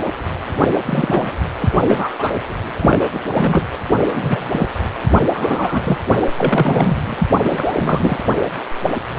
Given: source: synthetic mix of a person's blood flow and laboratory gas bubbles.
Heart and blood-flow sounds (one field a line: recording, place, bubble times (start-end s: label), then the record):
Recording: Doppler ultrasound of blood flow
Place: precordium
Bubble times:
0.61-0.68 s: bubbles
0.86-1.31 s: bubbles
1.58-1.70 s: bubbles
1.84-2.34 s: bubbles
2.79-3.08 s: bubbles
3.13-3.20 s: bubbles
3.33-3.63 s: bubbles
4.12-4.67 s: bubbles
5.33-5.98 s: bubbles
6.21-6.25 s: bubbles
6.38-6.96 s: bubbles
6.99-7.29 s: bubbles
7.43-8.19 s: bubbles
From the record:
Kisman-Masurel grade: 233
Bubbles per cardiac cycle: several, 3 to 8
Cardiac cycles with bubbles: 50 to 99%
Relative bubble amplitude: loud (0.450 to 0.775)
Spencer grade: 3 (all of the cardiac periods contain showers or single bubble signals, but not dominating or overriding the cardiac motion signals)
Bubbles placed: anywhere in the cardiac cycle